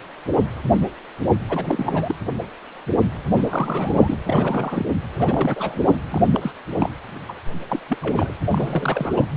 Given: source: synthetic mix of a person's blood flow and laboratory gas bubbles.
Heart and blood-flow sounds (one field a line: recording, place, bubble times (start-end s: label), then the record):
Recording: Doppler ultrasound of blood flow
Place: precordium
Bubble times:
1.49-2.15 s: bubbles
3.34-4.18 s: bubbles
4.25-4.86 s: bubbles
5.13-5.98 s: bubbles
6.12-6.30 s: bubbles
6.34-6.52 s: bubbles
6.76-6.91 s: bubbles
7.28-7.34 s: bubbles
7.69-7.79 s: bubbles
7.88-7.98 s: bubbles
8.02-8.34 s: bubbles
8.51-9.26 s: bubbles
From the record:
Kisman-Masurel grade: 332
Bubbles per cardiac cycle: rolling drumbeat, 9 or more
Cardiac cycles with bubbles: 50 to 99%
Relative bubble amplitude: moderate (0.250 to 0.450)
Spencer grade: 3 (all of the cardiac periods contain showers or single bubble signals, but not dominating or overriding the cardiac motion signals)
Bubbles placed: anywhere in the cardiac cycle